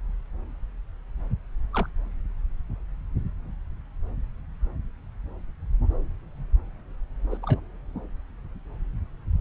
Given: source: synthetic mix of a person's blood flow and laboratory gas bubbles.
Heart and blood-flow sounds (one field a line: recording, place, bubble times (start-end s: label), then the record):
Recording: Doppler ultrasound of blood flow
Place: subclavian vein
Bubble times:
1.73-1.86 s: bubbles
7.31-7.38 s: bubbles
7.42-7.60 s: bubbles
From the record:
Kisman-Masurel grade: 121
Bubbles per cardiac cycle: 1 to 2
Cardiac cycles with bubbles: 10 to 50%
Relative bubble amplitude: barely perceptible (0.100 to 0.250)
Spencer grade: 2 (many but less than half of the cardiac periods contain bubble signals, singularly or in groups)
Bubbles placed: anywhere in the cardiac cycle